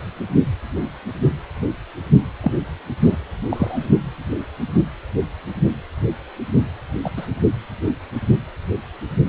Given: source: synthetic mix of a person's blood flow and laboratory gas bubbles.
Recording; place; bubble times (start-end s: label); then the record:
Doppler ultrasound of blood flow; precordium
2.40-2.52 s: bubbles
3.03-3.17 s: bubbles
3.50-3.88 s: bubbles
7.04-7.10 s: bubbles
7.17-7.26 s: bubbles
From the record:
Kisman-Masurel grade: 122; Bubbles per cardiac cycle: 1 to 2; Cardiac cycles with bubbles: 10 to 50%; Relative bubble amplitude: moderate (0.250 to 0.450); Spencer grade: 2 (many but less than half of the cardiac periods contain bubble signals, singularly or in groups); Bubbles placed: anywhere in the cardiac cycle